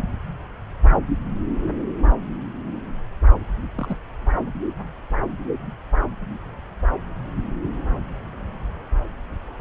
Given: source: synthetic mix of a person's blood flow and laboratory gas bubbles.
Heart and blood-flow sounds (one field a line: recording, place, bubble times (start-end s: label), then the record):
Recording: Doppler ultrasound of blood flow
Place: subclavian vein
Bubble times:
3.75-3.97 s: bubbles
From the record:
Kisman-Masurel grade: 111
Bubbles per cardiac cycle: 1 to 2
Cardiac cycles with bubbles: 1 to 10%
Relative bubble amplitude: barely perceptible (0.100 to 0.250)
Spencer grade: 1 (occasional bubble signal discernible with the cardiac motion signal, with majority of cardiac periods free of bubbles)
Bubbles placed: anywhere in the cardiac cycle